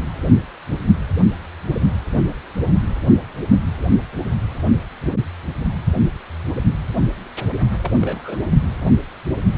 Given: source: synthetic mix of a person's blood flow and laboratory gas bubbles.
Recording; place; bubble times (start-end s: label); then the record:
Doppler ultrasound of blood flow; precordium
7.82-7.92 s: bubbles
8.00-8.38 s: bubbles
From the record:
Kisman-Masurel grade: 111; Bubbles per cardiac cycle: 1 to 2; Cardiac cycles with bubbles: 1 to 10%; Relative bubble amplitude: barely perceptible (0.100 to 0.250); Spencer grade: 1 (occasional bubble signal discernible with the cardiac motion signal, with majority of cardiac periods free of bubbles); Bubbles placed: only in the low amplitude regions of the cardiac cycle